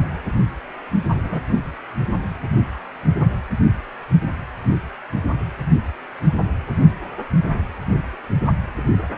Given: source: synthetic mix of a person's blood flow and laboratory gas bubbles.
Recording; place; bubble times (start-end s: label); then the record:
Doppler ultrasound of blood flow; precordium
1.08-1.41 s: bubbles
From the record:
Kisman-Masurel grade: 111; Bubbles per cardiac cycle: 1 to 2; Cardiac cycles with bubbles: 1 to 10%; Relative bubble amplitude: barely perceptible (0.100 to 0.250); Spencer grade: 1 (occasional bubble signal discernible with the cardiac motion signal, with majority of cardiac periods free of bubbles); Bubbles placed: only in the low amplitude regions of the cardiac cycle